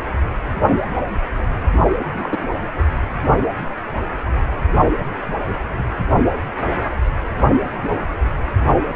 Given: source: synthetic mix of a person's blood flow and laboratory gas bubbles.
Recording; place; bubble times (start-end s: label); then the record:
Doppler ultrasound of blood flow; precordium
2.12-2.50 s: bubbles
From the record:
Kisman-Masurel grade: 112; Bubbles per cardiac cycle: 1 to 2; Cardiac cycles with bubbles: 1 to 10%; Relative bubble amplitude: moderate (0.250 to 0.450); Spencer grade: 1 (occasional bubble signal discernible with the cardiac motion signal, with majority of cardiac periods free of bubbles); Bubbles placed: only in the low amplitude regions of the cardiac cycle